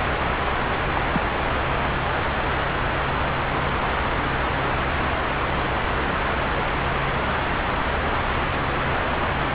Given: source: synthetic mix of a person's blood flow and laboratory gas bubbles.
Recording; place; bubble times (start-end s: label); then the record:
Doppler ultrasound of blood flow; subclavian vein
0.95-1.01 s: bubbles
1.12-1.22 s: bubbles
From the record:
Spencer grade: 1 (occasional bubble signal discernible with the cardiac motion signal, with majority of cardiac periods free of bubbles); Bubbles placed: anywhere in the cardiac cycle